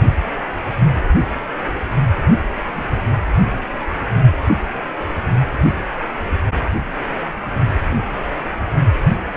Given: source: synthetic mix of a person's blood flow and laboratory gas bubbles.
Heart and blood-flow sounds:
Doppler ultrasound of blood flow; precordium
2.00-2.05 s: bubbles
2.75-2.84 s: bubbles
7.79-8.12 s: bubbles
From the record:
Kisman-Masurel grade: 121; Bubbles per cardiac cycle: 1 to 2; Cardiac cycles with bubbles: 10 to 50%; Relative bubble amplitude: barely perceptible (0.100 to 0.250); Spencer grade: 2 (many but less than half of the cardiac periods contain bubble signals, singularly or in groups); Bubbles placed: only in the low amplitude regions of the cardiac cycle

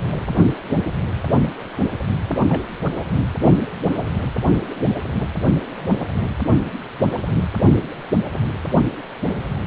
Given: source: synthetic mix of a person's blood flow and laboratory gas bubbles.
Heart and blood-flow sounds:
Doppler ultrasound of blood flow; precordium
2.49-2.63 s: bubbles
From the record:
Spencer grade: 2 (many but less than half of the cardiac periods contain bubble signals, singularly or in groups); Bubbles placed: anywhere in the cardiac cycle

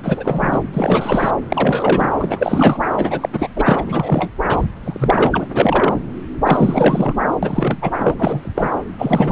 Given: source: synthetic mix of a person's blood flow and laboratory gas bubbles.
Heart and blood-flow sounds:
Doppler ultrasound of blood flow; subclavian vein
0.03-0.60 s: bubbles
0.73-1.31 s: bubbles
1.50-2.12 s: bubbles
2.19-2.79 s: bubbles
2.98-3.29 s: bubbles
3.33-3.48 s: bubbles
3.56-3.83 s: bubbles
3.86-4.30 s: bubbles
4.49-4.65 s: bubbles
4.83-5.48 s: bubbles
5.54-5.99 s: bubbles
6.44-7.15 s: bubbles
7.42-7.78 s: bubbles
7.82-7.91 s: bubbles
8.00-8.71 s: bubbles
8.98-9.32 s: bubbles
From the record:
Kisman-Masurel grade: 343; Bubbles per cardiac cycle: rolling drumbeat, 9 or more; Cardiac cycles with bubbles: 100%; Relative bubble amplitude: loud (0.450 to 0.775); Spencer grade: 3 (all of the cardiac periods contain showers or single bubble signals, but not dominating or overriding the cardiac motion signals); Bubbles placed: anywhere in the cardiac cycle

